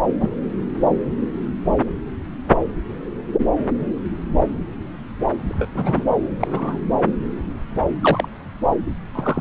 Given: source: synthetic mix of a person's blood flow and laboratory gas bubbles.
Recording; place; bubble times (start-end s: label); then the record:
Doppler ultrasound of blood flow; subclavian vein
0.20-0.29 s: bubbles
5.48-5.70 s: bubbles
5.74-6.04 s: bubbles
6.39-6.78 s: bubbles
8.01-8.29 s: bubbles
9.15-9.41 s: bubbles
From the record:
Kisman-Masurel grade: 122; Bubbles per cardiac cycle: 1 to 2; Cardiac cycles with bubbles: 10 to 50%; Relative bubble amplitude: moderate (0.250 to 0.450); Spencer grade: 2 (many but less than half of the cardiac periods contain bubble signals, singularly or in groups); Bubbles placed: anywhere in the cardiac cycle